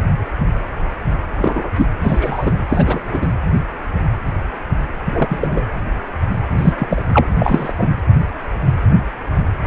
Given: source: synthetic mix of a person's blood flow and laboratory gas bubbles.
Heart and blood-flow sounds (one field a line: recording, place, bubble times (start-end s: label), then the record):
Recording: Doppler ultrasound of blood flow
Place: precordium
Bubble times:
1.38-1.70 s: bubbles
1.76-1.86 s: bubbles
2.02-2.54 s: bubbles
2.69-3.27 s: bubbles
5.06-5.66 s: bubbles
6.58-6.74 s: bubbles
6.79-7.02 s: bubbles
7.13-7.28 s: bubbles
7.39-7.72 s: bubbles
7.79-7.91 s: bubbles
From the record:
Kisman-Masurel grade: 233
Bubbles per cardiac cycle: several, 3 to 8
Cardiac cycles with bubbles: 50 to 99%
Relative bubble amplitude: loud (0.450 to 0.775)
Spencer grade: 3 (all of the cardiac periods contain showers or single bubble signals, but not dominating or overriding the cardiac motion signals)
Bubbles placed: anywhere in the cardiac cycle